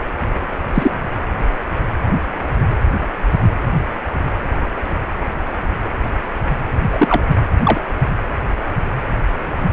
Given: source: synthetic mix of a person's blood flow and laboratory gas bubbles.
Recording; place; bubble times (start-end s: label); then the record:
Doppler ultrasound of blood flow; precordium
0.74-0.94 s: bubbles
6.90-7.23 s: bubbles
7.64-7.80 s: bubbles
From the record:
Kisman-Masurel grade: 123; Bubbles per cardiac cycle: 1 to 2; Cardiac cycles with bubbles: 10 to 50%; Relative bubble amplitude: loud (0.450 to 0.775); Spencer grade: 2 (many but less than half of the cardiac periods contain bubble signals, singularly or in groups); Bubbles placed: anywhere in the cardiac cycle